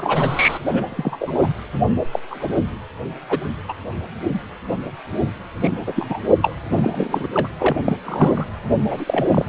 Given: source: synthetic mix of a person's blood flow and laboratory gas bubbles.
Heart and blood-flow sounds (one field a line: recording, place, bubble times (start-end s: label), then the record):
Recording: Doppler ultrasound of blood flow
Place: precordium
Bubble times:
0.00-0.58 s: bubbles
0.64-1.49 s: bubbles
2.12-2.19 s: bubbles
2.30-2.50 s: bubbles
3.29-3.40 s: bubbles
3.68-3.74 s: bubbles
5.60-5.71 s: bubbles
5.87-5.92 s: bubbles
5.96-6.20 s: bubbles
6.42-6.55 s: bubbles
6.70-7.27 s: bubbles
7.34-7.49 s: bubbles
7.60-7.76 s: bubbles
7.85-7.96 s: bubbles
8.03-8.47 s: bubbles
8.88-9.27 s: bubbles
9.30-9.45 s: bubbles
From the record:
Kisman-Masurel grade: 232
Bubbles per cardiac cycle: several, 3 to 8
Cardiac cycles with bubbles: 50 to 99%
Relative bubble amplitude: moderate (0.250 to 0.450)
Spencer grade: 3 (all of the cardiac periods contain showers or single bubble signals, but not dominating or overriding the cardiac motion signals)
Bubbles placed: anywhere in the cardiac cycle